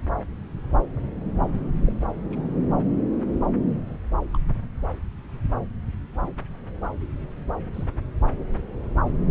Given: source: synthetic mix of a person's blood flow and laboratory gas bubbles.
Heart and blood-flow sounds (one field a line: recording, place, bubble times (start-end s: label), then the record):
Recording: Doppler ultrasound of blood flow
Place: subclavian vein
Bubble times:
1.85-1.92 s: bubbles
2.31-2.58 s: bubbles
3.86-3.97 s: bubbles
4.33-4.38 s: bubbles
7.74-7.84 s: bubbles
From the record:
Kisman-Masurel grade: 121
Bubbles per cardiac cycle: 1 to 2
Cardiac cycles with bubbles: 10 to 50%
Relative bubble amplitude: barely perceptible (0.100 to 0.250)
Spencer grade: 2 (many but less than half of the cardiac periods contain bubble signals, singularly or in groups)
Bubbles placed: anywhere in the cardiac cycle